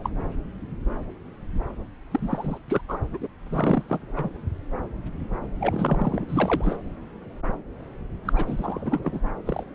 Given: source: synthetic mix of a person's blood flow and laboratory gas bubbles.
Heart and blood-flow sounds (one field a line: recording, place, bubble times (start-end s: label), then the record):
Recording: Doppler ultrasound of blood flow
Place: subclavian vein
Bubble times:
0.00-0.11 s: bubbles
2.12-2.58 s: bubbles
2.68-2.81 s: bubbles
2.88-2.98 s: bubbles
3.13-3.27 s: bubbles
3.49-4.29 s: bubbles
5.60-6.25 s: bubbles
6.28-6.76 s: bubbles
8.25-9.19 s: bubbles
9.45-9.63 s: bubbles
From the record:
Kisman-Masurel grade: 332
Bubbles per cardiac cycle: rolling drumbeat, 9 or more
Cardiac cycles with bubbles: 50 to 99%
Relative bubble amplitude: moderate (0.250 to 0.450)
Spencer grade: 3 (all of the cardiac periods contain showers or single bubble signals, but not dominating or overriding the cardiac motion signals)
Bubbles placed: anywhere in the cardiac cycle